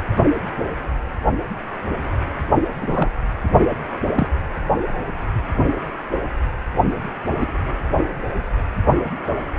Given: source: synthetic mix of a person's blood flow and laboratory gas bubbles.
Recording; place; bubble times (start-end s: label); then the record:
Doppler ultrasound of blood flow; precordium
2.81-3.10 s: bubbles
3.60-3.66 s: bubbles
4.14-4.28 s: bubbles
7.40-7.46 s: bubbles
From the record:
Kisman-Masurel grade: 122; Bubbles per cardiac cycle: 1 to 2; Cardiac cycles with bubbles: 10 to 50%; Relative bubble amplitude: moderate (0.250 to 0.450); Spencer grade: 2 (many but less than half of the cardiac periods contain bubble signals, singularly or in groups); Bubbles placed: anywhere in the cardiac cycle